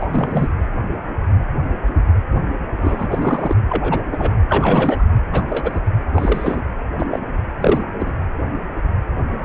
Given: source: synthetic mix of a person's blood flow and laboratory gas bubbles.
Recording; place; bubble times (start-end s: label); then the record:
Doppler ultrasound of blood flow; precordium
0.00-0.07 s: bubbles
0.14-0.48 s: bubbles
2.77-3.53 s: bubbles
3.68-4.01 s: bubbles
4.11-4.32 s: bubbles
4.49-5.04 s: bubbles
5.32-5.45 s: bubbles
5.47-5.79 s: bubbles
6.13-6.62 s: bubbles
6.99-7.07 s: bubbles
7.11-7.20 s: bubbles
7.60-7.83 s: bubbles
8.00-8.13 s: bubbles
From the record:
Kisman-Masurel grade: 233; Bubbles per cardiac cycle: several, 3 to 8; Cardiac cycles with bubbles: 50 to 99%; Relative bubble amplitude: loud (0.450 to 0.775); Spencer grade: 3 (all of the cardiac periods contain showers or single bubble signals, but not dominating or overriding the cardiac motion signals); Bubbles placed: anywhere in the cardiac cycle